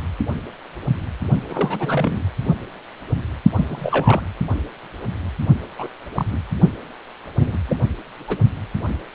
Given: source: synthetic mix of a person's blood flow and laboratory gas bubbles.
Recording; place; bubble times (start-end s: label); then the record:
Doppler ultrasound of blood flow; precordium
1.50-2.22 s: bubbles
3.56-4.21 s: bubbles
5.79-5.88 s: bubbles
6.15-6.25 s: bubbles
6.31-6.38 s: bubbles
7.37-7.59 s: bubbles
7.69-7.76 s: bubbles
8.28-8.38 s: bubbles
From the record:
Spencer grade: 2 (many but less than half of the cardiac periods contain bubble signals, singularly or in groups); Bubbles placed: only in the low amplitude regions of the cardiac cycle